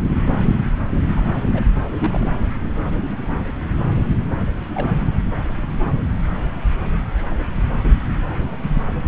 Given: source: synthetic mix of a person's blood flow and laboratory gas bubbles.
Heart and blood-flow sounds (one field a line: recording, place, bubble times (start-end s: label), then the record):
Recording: Doppler ultrasound of blood flow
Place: subclavian vein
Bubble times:
1.17-1.22 s: bubbles
1.51-1.61 s: bubbles
1.98-2.32 s: bubbles
4.74-4.88 s: bubbles
7.83-7.90 s: bubbles
From the record:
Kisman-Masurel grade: 122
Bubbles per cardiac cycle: 1 to 2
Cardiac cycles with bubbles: 10 to 50%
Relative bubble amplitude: moderate (0.250 to 0.450)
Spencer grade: 2 (many but less than half of the cardiac periods contain bubble signals, singularly or in groups)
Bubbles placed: anywhere in the cardiac cycle